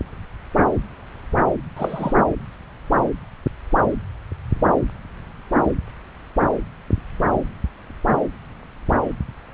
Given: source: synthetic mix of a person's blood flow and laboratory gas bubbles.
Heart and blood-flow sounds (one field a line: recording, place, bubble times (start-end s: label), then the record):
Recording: Doppler ultrasound of blood flow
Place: subclavian vein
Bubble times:
1.76-2.13 s: bubbles
From the record:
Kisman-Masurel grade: 112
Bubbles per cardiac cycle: 1 to 2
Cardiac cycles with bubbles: 1 to 10%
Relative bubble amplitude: moderate (0.250 to 0.450)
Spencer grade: 1 (occasional bubble signal discernible with the cardiac motion signal, with majority of cardiac periods free of bubbles)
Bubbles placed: anywhere in the cardiac cycle